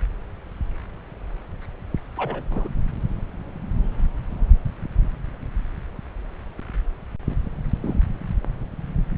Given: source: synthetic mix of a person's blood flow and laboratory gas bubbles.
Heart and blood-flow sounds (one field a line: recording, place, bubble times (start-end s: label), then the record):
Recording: Doppler ultrasound of blood flow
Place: subclavian vein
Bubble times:
2.17-2.44 s: bubbles
2.50-2.68 s: bubbles
7.82-7.95 s: bubbles
From the record:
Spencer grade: 2 (many but less than half of the cardiac periods contain bubble signals, singularly or in groups)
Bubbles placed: anywhere in the cardiac cycle